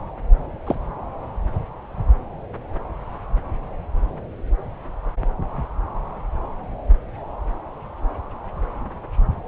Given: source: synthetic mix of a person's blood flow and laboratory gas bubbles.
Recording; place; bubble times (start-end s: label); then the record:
Doppler ultrasound of blood flow; subclavian vein
0.66-0.75 s: bubbles
From the record:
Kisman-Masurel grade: 112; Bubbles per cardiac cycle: 1 to 2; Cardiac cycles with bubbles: 1 to 10%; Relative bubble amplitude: moderate (0.250 to 0.450); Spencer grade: 1 (occasional bubble signal discernible with the cardiac motion signal, with majority of cardiac periods free of bubbles); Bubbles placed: anywhere in the cardiac cycle